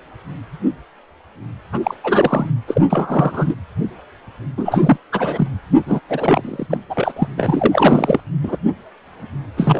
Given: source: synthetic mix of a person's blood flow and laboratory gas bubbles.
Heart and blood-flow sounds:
Doppler ultrasound of blood flow; precordium
1.72-1.80 s: bubbles
1.83-1.95 s: bubbles
2.04-2.50 s: bubbles
2.68-2.82 s: bubbles
2.90-3.55 s: bubbles
4.57-4.97 s: bubbles
5.12-5.47 s: bubbles
5.86-6.00 s: bubbles
6.09-6.67 s: bubbles
6.69-6.77 s: bubbles
6.89-7.12 s: bubbles
7.16-7.28 s: bubbles
7.37-8.20 s: bubbles
8.43-8.58 s: bubbles
9.57-9.80 s: bubbles
From the record:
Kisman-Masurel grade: 333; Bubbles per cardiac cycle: rolling drumbeat, 9 or more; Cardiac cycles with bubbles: 50 to 99%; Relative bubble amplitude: loud (0.450 to 0.775); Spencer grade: 3 (all of the cardiac periods contain showers or single bubble signals, but not dominating or overriding the cardiac motion signals); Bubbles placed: anywhere in the cardiac cycle

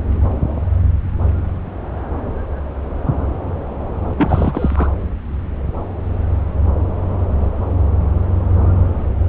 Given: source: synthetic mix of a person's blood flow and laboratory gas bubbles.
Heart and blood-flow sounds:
Doppler ultrasound of blood flow; subclavian vein
4.16-4.88 s: bubbles
From the record:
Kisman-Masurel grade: 212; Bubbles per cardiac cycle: several, 3 to 8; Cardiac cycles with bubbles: 1 to 10%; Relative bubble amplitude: moderate (0.250 to 0.450); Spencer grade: 1 (occasional bubble signal discernible with the cardiac motion signal, with majority of cardiac periods free of bubbles); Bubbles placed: anywhere in the cardiac cycle

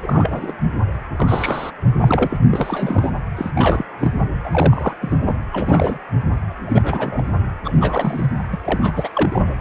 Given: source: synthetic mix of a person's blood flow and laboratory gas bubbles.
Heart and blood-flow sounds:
Doppler ultrasound of blood flow; precordium
0.03-0.56 s: bubbles
1.16-1.71 s: bubbles
1.99-2.38 s: bubbles
2.51-3.12 s: bubbles
3.36-3.51 s: bubbles
3.55-3.85 s: bubbles
4.00-4.12 s: bubbles
4.44-4.95 s: bubbles
5.00-5.17 s: bubbles
5.27-5.36 s: bubbles
5.53-5.99 s: bubbles
6.66-7.23 s: bubbles
7.64-8.29 s: bubbles
8.52-8.57 s: bubbles
8.64-9.56 s: bubbles
From the record:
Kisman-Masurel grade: 342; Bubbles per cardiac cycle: rolling drumbeat, 9 or more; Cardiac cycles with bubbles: 100%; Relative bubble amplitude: moderate (0.250 to 0.450); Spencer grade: 3 (all of the cardiac periods contain showers or single bubble signals, but not dominating or overriding the cardiac motion signals); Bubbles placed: anywhere in the cardiac cycle

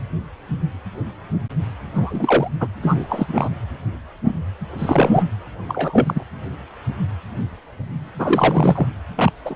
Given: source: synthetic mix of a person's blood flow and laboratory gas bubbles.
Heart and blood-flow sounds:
Doppler ultrasound of blood flow; precordium
1.94-2.51 s: bubbles
2.60-2.68 s: bubbles
2.83-3.49 s: bubbles
4.78-5.24 s: bubbles
5.68-6.25 s: bubbles
8.19-8.88 s: bubbles
9.16-9.32 s: bubbles
9.45-9.55 s: bubbles
From the record:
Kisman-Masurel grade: 223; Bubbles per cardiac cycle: several, 3 to 8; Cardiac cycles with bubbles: 10 to 50%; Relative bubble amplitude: loud (0.450 to 0.775); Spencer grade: 2 (many but less than half of the cardiac periods contain bubble signals, singularly or in groups); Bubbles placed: anywhere in the cardiac cycle

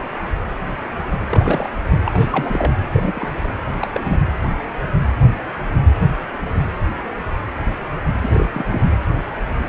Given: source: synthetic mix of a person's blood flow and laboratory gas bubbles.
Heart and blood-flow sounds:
Doppler ultrasound of blood flow; precordium
1.31-1.70 s: bubbles
2.06-2.73 s: bubbles
2.93-3.48 s: bubbles
3.81-3.89 s: bubbles
3.93-4.20 s: bubbles
8.22-8.49 s: bubbles
8.53-8.90 s: bubbles
From the record:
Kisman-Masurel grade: 222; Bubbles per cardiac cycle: several, 3 to 8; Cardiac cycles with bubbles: 10 to 50%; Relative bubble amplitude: moderate (0.250 to 0.450); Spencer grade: 2 (many but less than half of the cardiac periods contain bubble signals, singularly or in groups); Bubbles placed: anywhere in the cardiac cycle

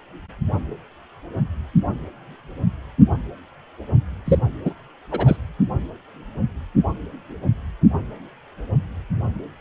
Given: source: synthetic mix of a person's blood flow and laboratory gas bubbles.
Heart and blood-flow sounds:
Doppler ultrasound of blood flow; precordium
4.26-4.38 s: bubbles
4.65-4.73 s: bubbles
5.11-5.37 s: bubbles
From the record:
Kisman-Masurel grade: 212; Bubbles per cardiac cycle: several, 3 to 8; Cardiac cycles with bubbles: 1 to 10%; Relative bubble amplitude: moderate (0.250 to 0.450); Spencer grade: 1 (occasional bubble signal discernible with the cardiac motion signal, with majority of cardiac periods free of bubbles); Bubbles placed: anywhere in the cardiac cycle

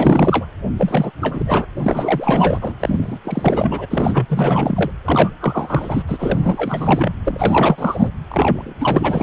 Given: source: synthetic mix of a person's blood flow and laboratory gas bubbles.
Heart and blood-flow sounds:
Doppler ultrasound of blood flow; precordium
0.00-0.46 s: bubbles
0.77-1.11 s: bubbles
1.21-1.66 s: bubbles
1.76-2.76 s: bubbles
2.79-3.18 s: bubbles
3.24-3.87 s: bubbles
3.91-4.26 s: bubbles
4.29-4.91 s: bubbles
5.04-5.31 s: bubbles
5.40-6.03 s: bubbles
6.08-7.12 s: bubbles
7.25-8.11 s: bubbles
8.31-8.74 s: bubbles
8.79-9.23 s: bubbles
From the record:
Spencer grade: 4 (maximum detectable bubble signal sounding continuously throughout systole and diastole of every cardiac period, and overriding the amplitude of the normal cardiac signals); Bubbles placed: anywhere in the cardiac cycle

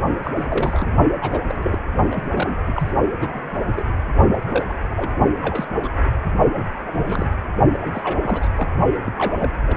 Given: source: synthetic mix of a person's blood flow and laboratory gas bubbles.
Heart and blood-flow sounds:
Doppler ultrasound of blood flow; precordium
0.23-0.31 s: bubbles
0.36-0.44 s: bubbles
0.49-0.88 s: bubbles
1.21-1.40 s: bubbles
1.44-1.80 s: bubbles
2.10-2.23 s: bubbles
2.33-2.56 s: bubbles
2.66-2.92 s: bubbles
3.20-3.43 s: bubbles
3.61-3.83 s: bubbles
4.47-4.66 s: bubbles
4.69-4.74 s: bubbles
4.91-5.08 s: bubbles
5.42-5.65 s: bubbles
5.83-5.88 s: bubbles
6.55-6.65 s: bubbles
6.86-7.30 s: bubbles
7.80-8.20 s: bubbles
8.22-8.50 s: bubbles
8.56-8.69 s: bubbles
9.04-9.13 s: bubbles
9.18-9.53 s: bubbles
9.67-9.77 s: bubbles
From the record:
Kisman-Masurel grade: 242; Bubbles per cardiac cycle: several, 3 to 8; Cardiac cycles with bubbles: 100%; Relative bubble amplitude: moderate (0.250 to 0.450); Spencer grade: 3 (all of the cardiac periods contain showers or single bubble signals, but not dominating or overriding the cardiac motion signals); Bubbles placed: only in the low amplitude regions of the cardiac cycle

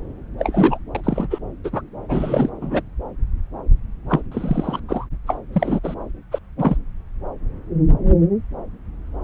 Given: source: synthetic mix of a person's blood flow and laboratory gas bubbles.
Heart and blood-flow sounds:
Doppler ultrasound of blood flow; subclavian vein
0.38-0.78 s: bubbles
0.95-1.01 s: bubbles
1.03-1.28 s: bubbles
1.30-1.39 s: bubbles
1.64-1.82 s: bubbles
2.08-2.49 s: bubbles
2.61-2.82 s: bubbles
4.09-4.23 s: bubbles
4.32-4.79 s: bubbles
4.89-5.06 s: bubbles
5.27-5.37 s: bubbles
5.53-5.79 s: bubbles
5.83-5.95 s: bubbles
6.32-6.39 s: bubbles
6.58-6.77 s: bubbles
From the record:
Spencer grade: 3 (all of the cardiac periods contain showers or single bubble signals, but not dominating or overriding the cardiac motion signals); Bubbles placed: anywhere in the cardiac cycle

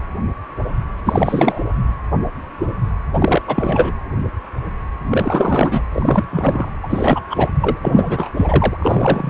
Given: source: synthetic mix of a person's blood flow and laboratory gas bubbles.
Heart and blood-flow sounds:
Doppler ultrasound of blood flow; precordium
1.05-1.59 s: bubbles
3.14-3.42 s: bubbles
3.47-3.95 s: bubbles
5.10-5.83 s: bubbles
5.92-6.25 s: bubbles
6.31-6.71 s: bubbles
6.83-7.21 s: bubbles
7.30-7.48 s: bubbles
7.60-7.78 s: bubbles
7.82-8.30 s: bubbles
8.36-9.30 s: bubbles
From the record:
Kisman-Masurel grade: 333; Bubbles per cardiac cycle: rolling drumbeat, 9 or more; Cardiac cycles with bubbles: 50 to 99%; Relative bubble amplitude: loud (0.450 to 0.775); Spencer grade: 3 (all of the cardiac periods contain showers or single bubble signals, but not dominating or overriding the cardiac motion signals); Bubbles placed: anywhere in the cardiac cycle

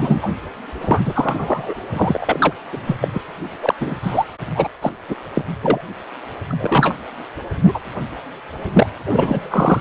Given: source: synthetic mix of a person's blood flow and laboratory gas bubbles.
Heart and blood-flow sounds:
Doppler ultrasound of blood flow; precordium
0.00-0.29 s: bubbles
0.80-1.01 s: bubbles
1.04-1.73 s: bubbles
1.92-2.38 s: bubbles
2.40-2.53 s: bubbles
2.71-2.96 s: bubbles
3.01-3.08 s: bubbles
3.13-3.18 s: bubbles
3.62-3.74 s: bubbles
3.80-3.94 s: bubbles
4.03-4.25 s: bubbles
4.55-4.69 s: bubbles
4.82-4.94 s: bubbles
5.08-5.15 s: bubbles
5.33-5.42 s: bubbles
5.62-5.81 s: bubbles
6.49-6.96 s: bubbles
7.63-7.80 s: bubbles
8.73-8.87 s: bubbles
9.05-9.81 s: bubbles
From the record:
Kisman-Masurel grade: 243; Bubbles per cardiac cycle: several, 3 to 8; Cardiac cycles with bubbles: 100%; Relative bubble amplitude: loud (0.450 to 0.775); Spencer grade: 3 (all of the cardiac periods contain showers or single bubble signals, but not dominating or overriding the cardiac motion signals); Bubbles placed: anywhere in the cardiac cycle

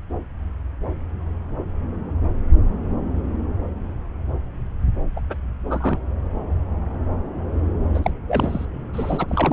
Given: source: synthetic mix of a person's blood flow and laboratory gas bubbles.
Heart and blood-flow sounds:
Doppler ultrasound of blood flow; subclavian vein
5.16-5.21 s: bubbles
5.29-5.35 s: bubbles
5.69-5.98 s: bubbles
7.94-7.99 s: bubbles
8.03-8.11 s: bubbles
8.27-8.65 s: bubbles
8.94-9.53 s: bubbles
From the record:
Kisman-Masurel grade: 222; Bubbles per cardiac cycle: several, 3 to 8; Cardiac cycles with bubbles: 10 to 50%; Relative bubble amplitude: moderate (0.250 to 0.450); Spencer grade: 2 (many but less than half of the cardiac periods contain bubble signals, singularly or in groups); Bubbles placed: anywhere in the cardiac cycle

